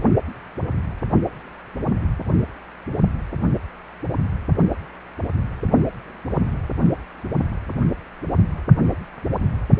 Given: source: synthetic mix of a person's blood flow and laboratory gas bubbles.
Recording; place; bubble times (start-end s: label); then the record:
Doppler ultrasound of blood flow; precordium
no bubbles
From the record:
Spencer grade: 0 (complete lack of bubble signals)